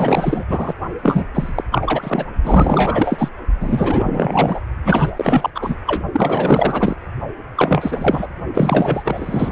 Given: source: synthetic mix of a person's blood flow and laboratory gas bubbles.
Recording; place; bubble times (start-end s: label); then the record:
Doppler ultrasound of blood flow; precordium
0.00-0.44 s: bubbles
0.48-0.74 s: bubbles
1.02-1.25 s: bubbles
1.33-1.64 s: bubbles
1.72-2.26 s: bubbles
2.42-3.29 s: bubbles
3.60-4.59 s: bubbles
4.84-5.10 s: bubbles
5.16-5.50 s: bubbles
5.54-5.76 s: bubbles
5.86-6.01 s: bubbles
6.12-6.95 s: bubbles
7.56-8.28 s: bubbles
8.54-9.52 s: bubbles
From the record:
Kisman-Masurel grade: 444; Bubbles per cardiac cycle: continuous sound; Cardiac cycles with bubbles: 100%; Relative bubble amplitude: maximal (0.775 to 0.999); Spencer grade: 4 (maximum detectable bubble signal sounding continuously throughout systole and diastole of every cardiac period, and overriding the amplitude of the normal cardiac signals); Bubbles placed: only in the low amplitude regions of the cardiac cycle